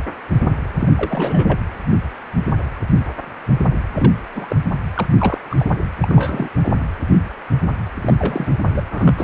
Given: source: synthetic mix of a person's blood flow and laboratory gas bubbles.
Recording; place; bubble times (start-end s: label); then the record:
Doppler ultrasound of blood flow; precordium
0.79-0.89 s: bubbles
0.97-1.59 s: bubbles
3.94-4.13 s: bubbles
4.34-4.55 s: bubbles
4.94-5.07 s: bubbles
5.19-5.38 s: bubbles
5.50-5.56 s: bubbles
5.58-5.71 s: bubbles
6.02-6.49 s: bubbles
6.63-6.70 s: bubbles
8.01-8.14 s: bubbles
8.19-8.53 s: bubbles
8.74-8.82 s: bubbles
8.90-9.24 s: bubbles
From the record:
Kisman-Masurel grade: 232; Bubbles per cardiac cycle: several, 3 to 8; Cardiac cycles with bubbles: 50 to 99%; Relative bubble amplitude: moderate (0.250 to 0.450); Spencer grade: 3 (all of the cardiac periods contain showers or single bubble signals, but not dominating or overriding the cardiac motion signals); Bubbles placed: anywhere in the cardiac cycle